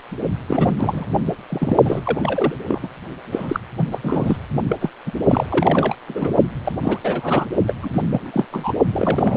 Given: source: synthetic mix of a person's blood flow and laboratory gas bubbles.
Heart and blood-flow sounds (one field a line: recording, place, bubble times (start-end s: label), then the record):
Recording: Doppler ultrasound of blood flow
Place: precordium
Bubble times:
0.46-0.74 s: bubbles
0.79-1.06 s: bubbles
1.49-1.77 s: bubbles
1.84-2.00 s: bubbles
2.03-2.55 s: bubbles
2.67-2.79 s: bubbles
2.82-2.88 s: bubbles
3.31-3.60 s: bubbles
3.76-3.89 s: bubbles
3.91-3.98 s: bubbles
4.03-4.37 s: bubbles
4.69-4.76 s: bubbles
4.81-4.89 s: bubbles
5.06-5.12 s: bubbles
5.24-5.95 s: bubbles
6.08-6.33 s: bubbles
6.64-6.76 s: bubbles
6.82-6.99 s: bubbles
7.03-7.46 s: bubbles
7.67-7.74 s: bubbles
7.82-7.89 s: bubbles
7.93-8.46 s: bubbles
8.52-8.73 s: bubbles
8.92-9.37 s: bubbles
From the record:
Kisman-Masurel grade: 342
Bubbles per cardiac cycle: rolling drumbeat, 9 or more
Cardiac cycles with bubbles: 100%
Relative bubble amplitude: moderate (0.250 to 0.450)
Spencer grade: 3 (all of the cardiac periods contain showers or single bubble signals, but not dominating or overriding the cardiac motion signals)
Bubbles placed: only in the low amplitude regions of the cardiac cycle